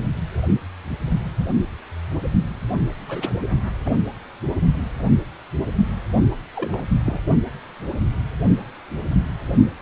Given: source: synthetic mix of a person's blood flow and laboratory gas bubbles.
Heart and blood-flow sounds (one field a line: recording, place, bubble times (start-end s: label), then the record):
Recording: Doppler ultrasound of blood flow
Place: precordium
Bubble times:
3.07-3.33 s: bubbles
3.85-3.91 s: bubbles
6.56-6.83 s: bubbles
7.06-7.21 s: bubbles
From the record:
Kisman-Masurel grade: 121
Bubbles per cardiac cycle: 1 to 2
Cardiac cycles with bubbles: 10 to 50%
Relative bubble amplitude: barely perceptible (0.100 to 0.250)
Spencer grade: 2 (many but less than half of the cardiac periods contain bubble signals, singularly or in groups)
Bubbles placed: only in the low amplitude regions of the cardiac cycle